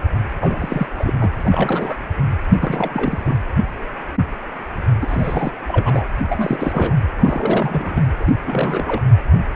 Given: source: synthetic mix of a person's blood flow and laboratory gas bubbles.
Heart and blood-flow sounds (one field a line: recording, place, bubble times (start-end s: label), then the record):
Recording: Doppler ultrasound of blood flow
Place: precordium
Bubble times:
0.41-0.88 s: bubbles
0.96-1.14 s: bubbles
1.20-1.31 s: bubbles
1.39-1.96 s: bubbles
2.54-3.36 s: bubbles
5.01-5.52 s: bubbles
5.67-6.05 s: bubbles
6.29-6.96 s: bubbles
7.16-8.02 s: bubbles
8.20-8.33 s: bubbles
8.46-9.04 s: bubbles
From the record:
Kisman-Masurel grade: 332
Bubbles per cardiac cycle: rolling drumbeat, 9 or more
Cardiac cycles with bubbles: 50 to 99%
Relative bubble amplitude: moderate (0.250 to 0.450)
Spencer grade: 3 (all of the cardiac periods contain showers or single bubble signals, but not dominating or overriding the cardiac motion signals)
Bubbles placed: anywhere in the cardiac cycle